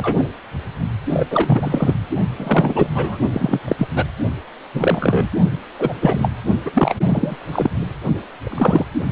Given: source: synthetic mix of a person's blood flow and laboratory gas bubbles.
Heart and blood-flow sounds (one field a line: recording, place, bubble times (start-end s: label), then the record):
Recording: Doppler ultrasound of blood flow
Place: precordium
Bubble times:
0.00-0.27 s: bubbles
1.09-1.27 s: bubbles
1.31-1.94 s: bubbles
2.37-2.88 s: bubbles
2.94-3.19 s: bubbles
3.33-3.59 s: bubbles
3.68-3.88 s: bubbles
3.94-4.05 s: bubbles
4.73-5.28 s: bubbles
5.79-5.93 s: bubbles
6.01-6.30 s: bubbles
6.65-6.70 s: bubbles
6.73-6.95 s: bubbles
7.08-7.36 s: bubbles
7.52-7.70 s: bubbles
8.42-8.85 s: bubbles
From the record:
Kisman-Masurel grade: 243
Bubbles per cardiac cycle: several, 3 to 8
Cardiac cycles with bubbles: 100%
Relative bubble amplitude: loud (0.450 to 0.775)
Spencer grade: 3 (all of the cardiac periods contain showers or single bubble signals, but not dominating or overriding the cardiac motion signals)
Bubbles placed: only in the low amplitude regions of the cardiac cycle